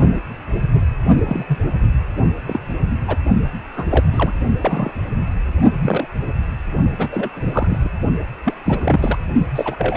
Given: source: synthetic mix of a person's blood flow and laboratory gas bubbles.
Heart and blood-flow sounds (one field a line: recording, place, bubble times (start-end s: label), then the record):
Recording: Doppler ultrasound of blood flow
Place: precordium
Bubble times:
1.15-1.46 s: bubbles
1.48-1.58 s: bubbles
2.48-2.60 s: bubbles
3.07-3.16 s: bubbles
3.76-3.85 s: bubbles
3.90-4.05 s: bubbles
4.12-4.33 s: bubbles
4.61-4.91 s: bubbles
5.82-6.07 s: bubbles
6.98-7.08 s: bubbles
7.11-7.30 s: bubbles
7.36-7.91 s: bubbles
8.45-8.54 s: bubbles
8.64-9.19 s: bubbles
9.54-9.97 s: bubbles
From the record:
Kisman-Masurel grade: 232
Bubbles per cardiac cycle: several, 3 to 8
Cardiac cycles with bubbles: 50 to 99%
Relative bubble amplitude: moderate (0.250 to 0.450)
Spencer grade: 3 (all of the cardiac periods contain showers or single bubble signals, but not dominating or overriding the cardiac motion signals)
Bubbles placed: only in the low amplitude regions of the cardiac cycle